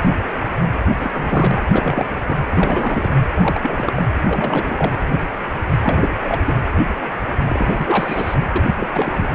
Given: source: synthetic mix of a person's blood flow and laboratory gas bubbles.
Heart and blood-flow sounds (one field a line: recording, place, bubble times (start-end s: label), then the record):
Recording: Doppler ultrasound of blood flow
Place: precordium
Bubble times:
1.00-1.10 s: bubbles
1.13-2.19 s: bubbles
2.27-2.38 s: bubbles
2.48-3.12 s: bubbles
3.38-4.03 s: bubbles
4.27-4.92 s: bubbles
5.82-6.14 s: bubbles
6.25-6.40 s: bubbles
6.45-6.54 s: bubbles
7.47-8.35 s: bubbles
8.53-8.62 s: bubbles
8.66-8.75 s: bubbles
8.79-8.88 s: bubbles
8.90-9.27 s: bubbles
From the record:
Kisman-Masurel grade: 332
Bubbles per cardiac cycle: rolling drumbeat, 9 or more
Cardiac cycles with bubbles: 50 to 99%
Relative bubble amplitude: moderate (0.250 to 0.450)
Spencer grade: 3 (all of the cardiac periods contain showers or single bubble signals, but not dominating or overriding the cardiac motion signals)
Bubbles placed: anywhere in the cardiac cycle